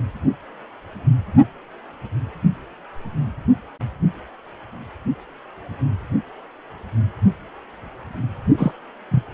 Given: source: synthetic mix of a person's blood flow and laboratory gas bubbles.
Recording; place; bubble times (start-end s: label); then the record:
Doppler ultrasound of blood flow; precordium
8.57-8.71 s: bubbles
9.11-9.24 s: bubbles
From the record:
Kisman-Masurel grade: 213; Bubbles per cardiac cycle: several, 3 to 8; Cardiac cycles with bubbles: 1 to 10%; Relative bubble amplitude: loud (0.450 to 0.775); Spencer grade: 1 (occasional bubble signal discernible with the cardiac motion signal, with majority of cardiac periods free of bubbles); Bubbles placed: only in the low amplitude regions of the cardiac cycle